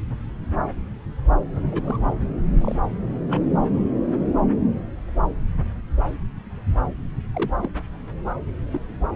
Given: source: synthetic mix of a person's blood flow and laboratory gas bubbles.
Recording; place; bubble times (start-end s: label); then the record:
Doppler ultrasound of blood flow; subclavian vein
1.71-1.98 s: bubbles
2.61-2.75 s: bubbles
3.29-3.46 s: bubbles
3.75-3.84 s: bubbles
7.34-7.51 s: bubbles
7.62-7.68 s: bubbles
8.72-8.79 s: bubbles
From the record:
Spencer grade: 2 (many but less than half of the cardiac periods contain bubble signals, singularly or in groups); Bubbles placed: anywhere in the cardiac cycle